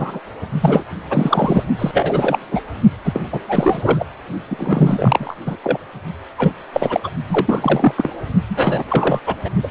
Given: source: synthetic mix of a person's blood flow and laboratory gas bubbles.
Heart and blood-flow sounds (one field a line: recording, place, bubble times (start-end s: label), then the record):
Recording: Doppler ultrasound of blood flow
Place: precordium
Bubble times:
0.00-0.20 s: bubbles
0.60-0.84 s: bubbles
1.10-1.64 s: bubbles
1.78-2.39 s: bubbles
2.51-2.61 s: bubbles
3.04-3.20 s: bubbles
3.32-3.39 s: bubbles
3.46-4.06 s: bubbles
4.50-5.37 s: bubbles
5.46-5.57 s: bubbles
5.63-5.78 s: bubbles
6.38-6.53 s: bubbles
6.73-7.00 s: bubbles
7.04-7.11 s: bubbles
7.29-7.95 s: bubbles
7.97-8.11 s: bubbles
8.49-8.83 s: bubbles
8.88-9.20 s: bubbles
9.27-9.35 s: bubbles
9.45-9.49 s: bubbles
9.63-9.68 s: bubbles
From the record:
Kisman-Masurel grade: 343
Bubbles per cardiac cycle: rolling drumbeat, 9 or more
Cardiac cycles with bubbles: 100%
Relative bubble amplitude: loud (0.450 to 0.775)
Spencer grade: 3 (all of the cardiac periods contain showers or single bubble signals, but not dominating or overriding the cardiac motion signals)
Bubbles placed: only in the low amplitude regions of the cardiac cycle